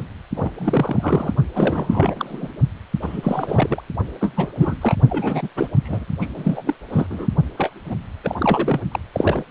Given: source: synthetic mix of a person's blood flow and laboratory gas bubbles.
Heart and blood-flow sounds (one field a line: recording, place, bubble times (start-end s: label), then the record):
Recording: Doppler ultrasound of blood flow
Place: precordium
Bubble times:
0.00-0.04 s: bubbles
0.36-0.51 s: bubbles
0.55-1.35 s: bubbles
1.54-2.52 s: bubbles
3.01-3.81 s: bubbles
4.20-4.54 s: bubbles
4.58-4.76 s: bubbles
4.81-4.95 s: bubbles
5.09-5.48 s: bubbles
5.56-5.68 s: bubbles
5.84-6.05 s: bubbles
6.20-6.27 s: bubbles
6.36-6.75 s: bubbles
6.88-7.06 s: bubbles
7.10-7.27 s: bubbles
7.57-7.71 s: bubbles
7.85-7.95 s: bubbles
8.23-8.35 s: bubbles
8.38-8.81 s: bubbles
8.91-8.99 s: bubbles
9.14-9.44 s: bubbles
From the record:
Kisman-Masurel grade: 342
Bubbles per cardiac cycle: rolling drumbeat, 9 or more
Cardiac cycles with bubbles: 100%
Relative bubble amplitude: moderate (0.250 to 0.450)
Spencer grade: 3 (all of the cardiac periods contain showers or single bubble signals, but not dominating or overriding the cardiac motion signals)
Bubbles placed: only in the low amplitude regions of the cardiac cycle